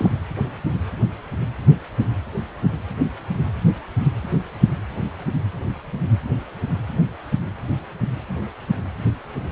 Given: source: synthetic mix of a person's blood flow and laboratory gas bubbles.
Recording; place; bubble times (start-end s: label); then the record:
Doppler ultrasound of blood flow; precordium
0.00-0.09 s: bubbles
From the record:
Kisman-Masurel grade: 112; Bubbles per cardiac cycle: 1 to 2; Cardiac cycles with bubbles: 1 to 10%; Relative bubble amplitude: moderate (0.250 to 0.450); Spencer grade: 1 (occasional bubble signal discernible with the cardiac motion signal, with majority of cardiac periods free of bubbles); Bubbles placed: anywhere in the cardiac cycle